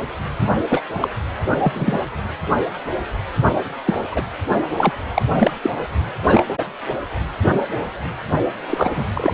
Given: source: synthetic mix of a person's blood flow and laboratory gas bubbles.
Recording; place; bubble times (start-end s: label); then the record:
Doppler ultrasound of blood flow; precordium
0.70-0.83 s: bubbles
0.95-1.08 s: bubbles
1.64-2.00 s: bubbles
3.85-4.04 s: bubbles
4.11-4.22 s: bubbles
4.77-4.92 s: bubbles
5.14-5.22 s: bubbles
5.34-5.51 s: bubbles
5.62-5.71 s: bubbles
6.28-6.43 s: bubbles
8.70-8.91 s: bubbles
8.95-9.04 s: bubbles
9.13-9.34 s: bubbles
From the record:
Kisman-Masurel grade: 233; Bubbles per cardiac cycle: several, 3 to 8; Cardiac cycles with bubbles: 50 to 99%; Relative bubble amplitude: loud (0.450 to 0.775); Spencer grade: 3 (all of the cardiac periods contain showers or single bubble signals, but not dominating or overriding the cardiac motion signals); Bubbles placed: anywhere in the cardiac cycle